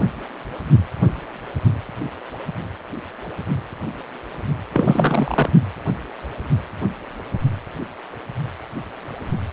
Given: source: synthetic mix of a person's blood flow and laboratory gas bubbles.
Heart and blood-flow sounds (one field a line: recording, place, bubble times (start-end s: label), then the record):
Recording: Doppler ultrasound of blood flow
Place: precordium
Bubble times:
4.73-5.50 s: bubbles
From the record:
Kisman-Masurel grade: 213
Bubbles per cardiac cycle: several, 3 to 8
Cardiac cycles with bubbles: 1 to 10%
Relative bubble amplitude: loud (0.450 to 0.775)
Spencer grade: 1 (occasional bubble signal discernible with the cardiac motion signal, with majority of cardiac periods free of bubbles)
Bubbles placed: only in the low amplitude regions of the cardiac cycle